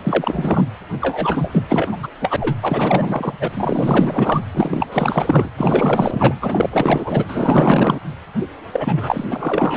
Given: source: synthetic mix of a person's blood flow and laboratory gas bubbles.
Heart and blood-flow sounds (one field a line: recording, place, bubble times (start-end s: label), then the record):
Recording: Doppler ultrasound of blood flow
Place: precordium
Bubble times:
0.03-0.64 s: bubbles
0.99-1.89 s: bubbles
1.91-2.08 s: bubbles
2.20-2.37 s: bubbles
2.40-2.56 s: bubbles
2.62-3.34 s: bubbles
3.40-3.48 s: bubbles
3.52-4.41 s: bubbles
4.53-4.86 s: bubbles
4.91-5.48 s: bubbles
5.57-6.35 s: bubbles
6.41-6.69 s: bubbles
6.72-7.25 s: bubbles
7.28-8.01 s: bubbles
8.73-9.25 s: bubbles
9.30-9.77 s: bubbles
From the record:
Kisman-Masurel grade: 444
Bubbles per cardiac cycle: continuous sound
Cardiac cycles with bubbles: 100%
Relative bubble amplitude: maximal (0.775 to 0.999)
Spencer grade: 4 (maximum detectable bubble signal sounding continuously throughout systole and diastole of every cardiac period, and overriding the amplitude of the normal cardiac signals)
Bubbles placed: anywhere in the cardiac cycle